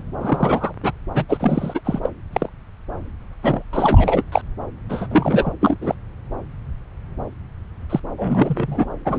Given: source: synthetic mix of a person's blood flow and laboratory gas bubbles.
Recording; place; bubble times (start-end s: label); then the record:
Doppler ultrasound of blood flow; subclavian vein
0.20-0.73 s: bubbles
0.83-0.92 s: bubbles
1.14-1.25 s: bubbles
1.29-1.80 s: bubbles
1.84-1.99 s: bubbles
2.03-2.12 s: bubbles
2.32-2.49 s: bubbles
3.42-4.23 s: bubbles
4.32-4.42 s: bubbles
4.89-5.08 s: bubbles
5.11-5.52 s: bubbles
5.61-5.76 s: bubbles
5.81-5.95 s: bubbles
7.89-8.00 s: bubbles
8.18-8.87 s: bubbles
9.05-9.19 s: bubbles
From the record:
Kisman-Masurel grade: 333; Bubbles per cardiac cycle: rolling drumbeat, 9 or more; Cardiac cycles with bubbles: 50 to 99%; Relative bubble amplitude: loud (0.450 to 0.775); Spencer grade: 3 (all of the cardiac periods contain showers or single bubble signals, but not dominating or overriding the cardiac motion signals); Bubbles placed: anywhere in the cardiac cycle